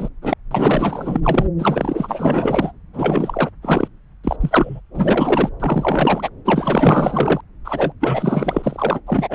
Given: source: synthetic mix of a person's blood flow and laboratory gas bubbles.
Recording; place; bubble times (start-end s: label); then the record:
Doppler ultrasound of blood flow; subclavian vein
0.00-0.09 s: bubbles
0.22-0.34 s: bubbles
0.51-1.21 s: bubbles
1.24-1.46 s: bubbles
1.58-2.72 s: bubbles
2.93-3.50 s: bubbles
3.62-3.88 s: bubbles
4.24-4.37 s: bubbles
4.40-4.80 s: bubbles
4.93-5.50 s: bubbles
5.60-6.29 s: bubbles
6.45-7.41 s: bubbles
7.64-7.94 s: bubbles
8.00-9.01 s: bubbles
9.06-9.35 s: bubbles
From the record:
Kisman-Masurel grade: 444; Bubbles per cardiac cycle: continuous sound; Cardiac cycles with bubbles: 100%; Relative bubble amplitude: maximal (0.775 to 0.999); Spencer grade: 4 (maximum detectable bubble signal sounding continuously throughout systole and diastole of every cardiac period, and overriding the amplitude of the normal cardiac signals); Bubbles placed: anywhere in the cardiac cycle